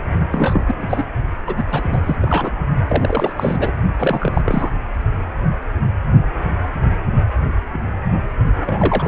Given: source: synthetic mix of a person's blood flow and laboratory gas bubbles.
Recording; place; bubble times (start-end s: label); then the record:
Doppler ultrasound of blood flow; precordium
0.31-0.64 s: bubbles
0.67-0.75 s: bubbles
0.78-1.03 s: bubbles
1.47-1.63 s: bubbles
1.69-2.16 s: bubbles
2.21-2.51 s: bubbles
2.88-3.33 s: bubbles
3.36-3.71 s: bubbles
3.99-4.41 s: bubbles
4.46-4.70 s: bubbles
8.60-9.08 s: bubbles
From the record:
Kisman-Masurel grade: 333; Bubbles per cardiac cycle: rolling drumbeat, 9 or more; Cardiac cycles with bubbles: 50 to 99%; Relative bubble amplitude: loud (0.450 to 0.775); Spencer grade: 3 (all of the cardiac periods contain showers or single bubble signals, but not dominating or overriding the cardiac motion signals); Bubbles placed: only in the low amplitude regions of the cardiac cycle